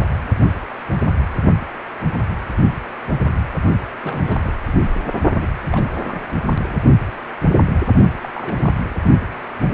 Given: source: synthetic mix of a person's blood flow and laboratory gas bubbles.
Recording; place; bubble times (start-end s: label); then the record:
Doppler ultrasound of blood flow; precordium
4.02-4.40 s: bubbles
4.43-4.54 s: bubbles
4.66-4.72 s: bubbles
5.40-5.47 s: bubbles
5.70-5.87 s: bubbles
6.04-6.18 s: bubbles
6.61-6.78 s: bubbles
8.22-8.29 s: bubbles
8.34-8.95 s: bubbles
From the record:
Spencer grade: 2 (many but less than half of the cardiac periods contain bubble signals, singularly or in groups); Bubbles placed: only in the low amplitude regions of the cardiac cycle